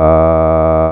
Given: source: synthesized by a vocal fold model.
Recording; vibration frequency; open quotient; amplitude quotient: sustained vowel; 80 Hz; 0.5; 1.2